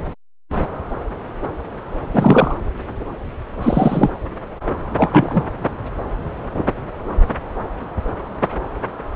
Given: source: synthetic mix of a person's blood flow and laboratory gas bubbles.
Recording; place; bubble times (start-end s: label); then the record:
Doppler ultrasound of blood flow; subclavian vein
2.13-2.54 s: bubbles
3.60-4.10 s: bubbles
4.97-5.44 s: bubbles
From the record:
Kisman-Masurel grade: 223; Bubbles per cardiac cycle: several, 3 to 8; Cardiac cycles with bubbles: 10 to 50%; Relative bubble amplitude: loud (0.450 to 0.775); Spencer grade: 2 (many but less than half of the cardiac periods contain bubble signals, singularly or in groups); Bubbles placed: anywhere in the cardiac cycle